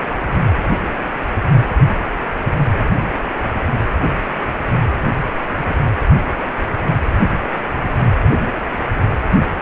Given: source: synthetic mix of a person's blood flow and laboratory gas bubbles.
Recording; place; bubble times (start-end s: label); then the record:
Doppler ultrasound of blood flow; precordium
5.68-5.76 s: bubbles
From the record:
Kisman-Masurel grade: 112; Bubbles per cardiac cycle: 1 to 2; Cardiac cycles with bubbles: 1 to 10%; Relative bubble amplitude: moderate (0.250 to 0.450); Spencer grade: 1 (occasional bubble signal discernible with the cardiac motion signal, with majority of cardiac periods free of bubbles); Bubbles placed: anywhere in the cardiac cycle